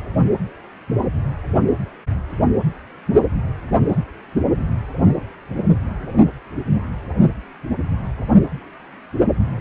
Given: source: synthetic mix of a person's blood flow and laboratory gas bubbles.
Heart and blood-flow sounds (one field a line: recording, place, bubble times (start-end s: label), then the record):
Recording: Doppler ultrasound of blood flow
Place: precordium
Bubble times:
no bubbles
From the record:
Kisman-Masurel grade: 000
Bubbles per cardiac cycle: 0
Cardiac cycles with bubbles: 0%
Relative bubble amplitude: no bubbles discernible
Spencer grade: 0 (complete lack of bubble signals)